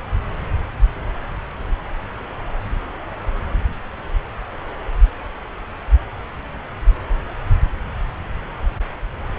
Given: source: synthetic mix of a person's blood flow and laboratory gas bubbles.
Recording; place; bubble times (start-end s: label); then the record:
Doppler ultrasound of blood flow; subclavian vein
no bubbles
From the record:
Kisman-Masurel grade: 000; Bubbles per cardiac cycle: 0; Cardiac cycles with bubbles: 0%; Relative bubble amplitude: no bubbles discernible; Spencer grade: 0 (complete lack of bubble signals)